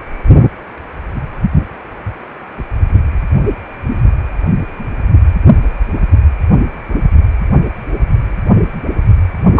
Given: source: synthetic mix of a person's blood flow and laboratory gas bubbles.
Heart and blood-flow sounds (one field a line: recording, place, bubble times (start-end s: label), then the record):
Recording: Doppler ultrasound of blood flow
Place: precordium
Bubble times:
9.56-9.60 s: bubbles
From the record:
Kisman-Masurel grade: 123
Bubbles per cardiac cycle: 1 to 2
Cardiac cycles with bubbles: 10 to 50%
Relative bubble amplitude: loud (0.450 to 0.775)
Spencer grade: 2 (many but less than half of the cardiac periods contain bubble signals, singularly or in groups)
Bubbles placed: anywhere in the cardiac cycle